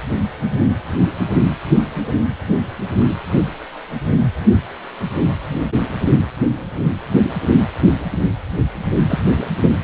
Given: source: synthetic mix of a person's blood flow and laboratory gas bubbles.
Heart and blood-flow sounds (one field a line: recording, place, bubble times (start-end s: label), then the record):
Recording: Doppler ultrasound of blood flow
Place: precordium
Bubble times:
9.08-9.19 s: bubbles
9.29-9.44 s: bubbles
From the record:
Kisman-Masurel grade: 113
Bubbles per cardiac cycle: 1 to 2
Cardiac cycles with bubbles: 1 to 10%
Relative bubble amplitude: loud (0.450 to 0.775)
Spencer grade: 1 (occasional bubble signal discernible with the cardiac motion signal, with majority of cardiac periods free of bubbles)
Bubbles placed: anywhere in the cardiac cycle